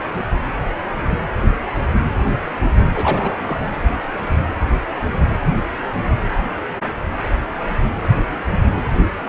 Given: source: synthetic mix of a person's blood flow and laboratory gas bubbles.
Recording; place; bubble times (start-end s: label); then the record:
Doppler ultrasound of blood flow; precordium
2.94-3.69 s: bubbles
From the record:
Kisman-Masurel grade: 211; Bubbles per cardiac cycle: several, 3 to 8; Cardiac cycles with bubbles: 1 to 10%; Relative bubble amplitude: barely perceptible (0.100 to 0.250); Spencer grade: 1 (occasional bubble signal discernible with the cardiac motion signal, with majority of cardiac periods free of bubbles); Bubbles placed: anywhere in the cardiac cycle